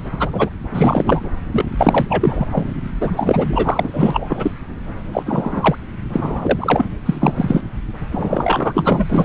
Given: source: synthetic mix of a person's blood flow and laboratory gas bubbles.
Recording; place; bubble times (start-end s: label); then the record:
Doppler ultrasound of blood flow; subclavian vein
0.19-0.50 s: bubbles
0.72-1.31 s: bubbles
1.52-1.65 s: bubbles
1.78-2.06 s: bubbles
2.08-2.46 s: bubbles
2.51-2.66 s: bubbles
3.01-4.26 s: bubbles
4.29-4.51 s: bubbles
5.12-5.23 s: bubbles
5.25-5.75 s: bubbles
6.12-6.85 s: bubbles
7.06-7.33 s: bubbles
7.36-7.63 s: bubbles
8.11-9.25 s: bubbles
From the record:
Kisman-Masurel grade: 444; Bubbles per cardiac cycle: continuous sound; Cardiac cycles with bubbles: 100%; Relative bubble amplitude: maximal (0.775 to 0.999); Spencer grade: 4 (maximum detectable bubble signal sounding continuously throughout systole and diastole of every cardiac period, and overriding the amplitude of the normal cardiac signals); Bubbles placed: anywhere in the cardiac cycle